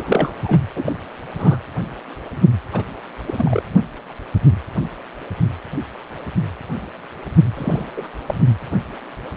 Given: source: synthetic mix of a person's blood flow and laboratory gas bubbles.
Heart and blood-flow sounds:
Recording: Doppler ultrasound of blood flow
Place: precordium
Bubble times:
0.00-0.34 s: bubbles
0.44-0.58 s: bubbles
0.76-0.93 s: bubbles
1.36-1.57 s: bubbles
2.72-2.84 s: bubbles
3.25-3.62 s: bubbles
7.57-7.85 s: bubbles
7.96-8.09 s: bubbles
8.27-8.34 s: bubbles
From the record:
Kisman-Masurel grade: 222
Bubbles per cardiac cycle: several, 3 to 8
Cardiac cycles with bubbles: 10 to 50%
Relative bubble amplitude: moderate (0.250 to 0.450)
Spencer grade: 2 (many but less than half of the cardiac periods contain bubble signals, singularly or in groups)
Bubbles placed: anywhere in the cardiac cycle

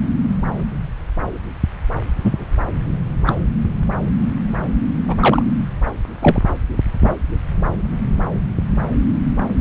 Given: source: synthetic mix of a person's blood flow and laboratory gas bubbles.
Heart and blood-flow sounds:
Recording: Doppler ultrasound of blood flow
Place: subclavian vein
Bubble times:
2.22-2.44 s: bubbles
3.26-3.36 s: bubbles
5.08-5.16 s: bubbles
5.20-5.43 s: bubbles
6.21-6.39 s: bubbles
7.04-7.14 s: bubbles
From the record:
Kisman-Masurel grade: 123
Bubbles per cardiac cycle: 1 to 2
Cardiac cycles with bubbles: 10 to 50%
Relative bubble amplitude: loud (0.450 to 0.775)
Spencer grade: 2 (many but less than half of the cardiac periods contain bubble signals, singularly or in groups)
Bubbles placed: anywhere in the cardiac cycle

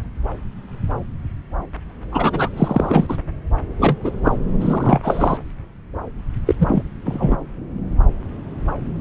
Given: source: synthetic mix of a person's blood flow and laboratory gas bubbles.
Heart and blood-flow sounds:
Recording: Doppler ultrasound of blood flow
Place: subclavian vein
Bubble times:
2.12-2.49 s: bubbles
2.57-3.17 s: bubbles
3.79-3.96 s: bubbles
4.03-4.12 s: bubbles
4.23-4.34 s: bubbles
4.59-5.00 s: bubbles
5.02-5.38 s: bubbles
6.46-6.55 s: bubbles
6.59-6.83 s: bubbles
7.04-7.37 s: bubbles
From the record:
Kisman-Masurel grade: 223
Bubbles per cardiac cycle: several, 3 to 8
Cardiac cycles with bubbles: 10 to 50%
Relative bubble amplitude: loud (0.450 to 0.775)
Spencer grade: 2 (many but less than half of the cardiac periods contain bubble signals, singularly or in groups)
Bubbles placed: anywhere in the cardiac cycle

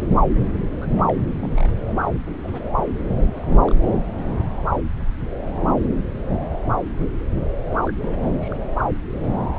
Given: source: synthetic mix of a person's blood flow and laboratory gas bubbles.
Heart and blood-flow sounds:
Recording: Doppler ultrasound of blood flow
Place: subclavian vein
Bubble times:
0.81-0.86 s: bubbles
0.96-1.01 s: bubbles
1.07-1.14 s: bubbles
1.43-1.77 s: bubbles
1.91-2.00 s: bubbles
2.02-2.15 s: bubbles
2.29-2.40 s: bubbles
2.43-2.71 s: bubbles
2.77-2.83 s: bubbles
3.23-3.73 s: bubbles
7.65-7.80 s: bubbles
7.87-7.92 s: bubbles
8.00-8.57 s: bubbles
From the record:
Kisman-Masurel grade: 221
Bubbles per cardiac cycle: several, 3 to 8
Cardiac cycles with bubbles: 10 to 50%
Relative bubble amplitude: barely perceptible (0.100 to 0.250)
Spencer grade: 2 (many but less than half of the cardiac periods contain bubble signals, singularly or in groups)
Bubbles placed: anywhere in the cardiac cycle

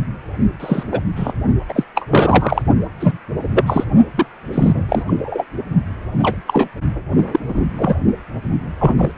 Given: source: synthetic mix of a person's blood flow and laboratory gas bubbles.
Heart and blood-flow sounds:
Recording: Doppler ultrasound of blood flow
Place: precordium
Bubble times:
0.59-0.83 s: bubbles
0.91-1.00 s: bubbles
1.15-1.32 s: bubbles
1.69-1.83 s: bubbles
1.95-2.08 s: bubbles
2.10-2.62 s: bubbles
3.00-3.17 s: bubbles
3.48-3.63 s: bubbles
3.66-3.84 s: bubbles
4.17-4.26 s: bubbles
4.52-4.85 s: bubbles
4.88-5.03 s: bubbles
5.07-5.45 s: bubbles
6.22-6.37 s: bubbles
6.47-6.69 s: bubbles
7.32-7.40 s: bubbles
7.48-7.62 s: bubbles
7.76-8.03 s: bubbles
8.79-9.11 s: bubbles
From the record:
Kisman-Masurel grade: 233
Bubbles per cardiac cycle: several, 3 to 8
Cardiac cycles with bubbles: 50 to 99%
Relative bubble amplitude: loud (0.450 to 0.775)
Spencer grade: 3 (all of the cardiac periods contain showers or single bubble signals, but not dominating or overriding the cardiac motion signals)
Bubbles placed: only in the low amplitude regions of the cardiac cycle

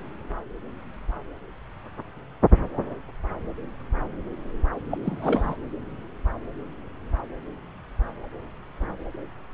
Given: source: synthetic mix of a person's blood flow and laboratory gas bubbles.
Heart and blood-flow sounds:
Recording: Doppler ultrasound of blood flow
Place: subclavian vein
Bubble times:
4.90-4.98 s: bubbles
5.03-5.56 s: bubbles
From the record:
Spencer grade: 1 (occasional bubble signal discernible with the cardiac motion signal, with majority of cardiac periods free of bubbles)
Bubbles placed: anywhere in the cardiac cycle

